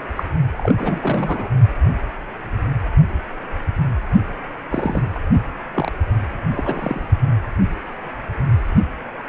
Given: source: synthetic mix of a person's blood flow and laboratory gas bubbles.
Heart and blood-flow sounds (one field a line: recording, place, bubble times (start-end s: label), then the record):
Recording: Doppler ultrasound of blood flow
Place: precordium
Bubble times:
0.16-0.23 s: bubbles
0.52-0.74 s: bubbles
0.77-1.50 s: bubbles
4.70-5.02 s: bubbles
5.14-5.19 s: bubbles
5.74-5.92 s: bubbles
6.52-7.02 s: bubbles
From the record:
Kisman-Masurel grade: 232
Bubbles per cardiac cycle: several, 3 to 8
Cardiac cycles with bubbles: 50 to 99%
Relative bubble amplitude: moderate (0.250 to 0.450)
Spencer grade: 3 (all of the cardiac periods contain showers or single bubble signals, but not dominating or overriding the cardiac motion signals)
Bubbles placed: only in the low amplitude regions of the cardiac cycle